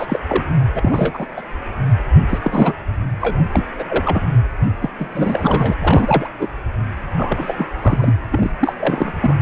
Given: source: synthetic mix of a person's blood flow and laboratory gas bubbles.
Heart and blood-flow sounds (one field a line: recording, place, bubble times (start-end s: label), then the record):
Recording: Doppler ultrasound of blood flow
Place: precordium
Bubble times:
0.00-0.19 s: bubbles
0.28-0.43 s: bubbles
0.74-1.27 s: bubbles
1.36-1.42 s: bubbles
2.29-2.39 s: bubbles
2.43-2.76 s: bubbles
3.20-3.44 s: bubbles
3.53-3.66 s: bubbles
3.78-3.84 s: bubbles
3.88-4.28 s: bubbles
4.82-4.90 s: bubbles
4.99-5.75 s: bubbles
5.79-6.28 s: bubbles
6.40-6.49 s: bubbles
7.09-7.65 s: bubbles
7.81-8.13 s: bubbles
8.31-8.51 s: bubbles
8.60-9.36 s: bubbles
From the record:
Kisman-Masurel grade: 343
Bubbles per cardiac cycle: rolling drumbeat, 9 or more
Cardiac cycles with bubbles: 100%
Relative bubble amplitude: loud (0.450 to 0.775)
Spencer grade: 3 (all of the cardiac periods contain showers or single bubble signals, but not dominating or overriding the cardiac motion signals)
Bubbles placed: anywhere in the cardiac cycle